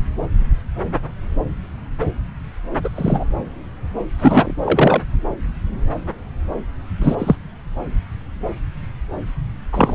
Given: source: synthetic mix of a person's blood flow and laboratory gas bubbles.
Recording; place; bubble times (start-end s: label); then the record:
Doppler ultrasound of blood flow; subclavian vein
2.83-2.90 s: bubbles
2.96-3.25 s: bubbles
4.19-4.54 s: bubbles
4.65-5.03 s: bubbles
7.02-7.16 s: bubbles
7.18-7.36 s: bubbles
9.72-9.95 s: bubbles
From the record:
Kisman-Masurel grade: 223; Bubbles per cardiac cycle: several, 3 to 8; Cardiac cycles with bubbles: 10 to 50%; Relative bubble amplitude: loud (0.450 to 0.775); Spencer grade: 2 (many but less than half of the cardiac periods contain bubble signals, singularly or in groups); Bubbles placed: anywhere in the cardiac cycle